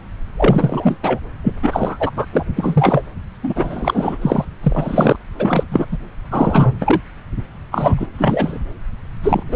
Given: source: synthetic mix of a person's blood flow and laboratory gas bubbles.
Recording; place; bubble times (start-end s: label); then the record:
Doppler ultrasound of blood flow; subclavian vein
0.37-0.98 s: bubbles
1.02-1.19 s: bubbles
1.43-1.53 s: bubbles
1.62-2.11 s: bubbles
2.17-2.25 s: bubbles
2.33-2.44 s: bubbles
2.56-3.04 s: bubbles
3.43-4.17 s: bubbles
4.21-4.45 s: bubbles
4.63-5.16 s: bubbles
5.37-5.86 s: bubbles
5.92-5.97 s: bubbles
6.31-7.00 s: bubbles
7.71-8.08 s: bubbles
8.18-8.59 s: bubbles
9.23-9.43 s: bubbles
9.48-9.56 s: bubbles
From the record:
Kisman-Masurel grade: 343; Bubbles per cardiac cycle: rolling drumbeat, 9 or more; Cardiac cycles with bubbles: 100%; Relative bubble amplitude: loud (0.450 to 0.775); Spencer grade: 3 (all of the cardiac periods contain showers or single bubble signals, but not dominating or overriding the cardiac motion signals); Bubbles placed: anywhere in the cardiac cycle